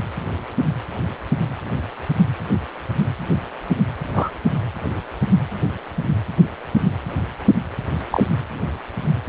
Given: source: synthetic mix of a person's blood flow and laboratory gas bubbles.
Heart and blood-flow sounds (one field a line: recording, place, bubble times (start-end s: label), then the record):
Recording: Doppler ultrasound of blood flow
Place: precordium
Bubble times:
4.13-4.29 s: bubbles
8.11-8.24 s: bubbles
From the record:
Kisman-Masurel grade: 122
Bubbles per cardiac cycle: 1 to 2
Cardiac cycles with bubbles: 10 to 50%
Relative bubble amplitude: moderate (0.250 to 0.450)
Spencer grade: 2 (many but less than half of the cardiac periods contain bubble signals, singularly or in groups)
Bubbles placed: anywhere in the cardiac cycle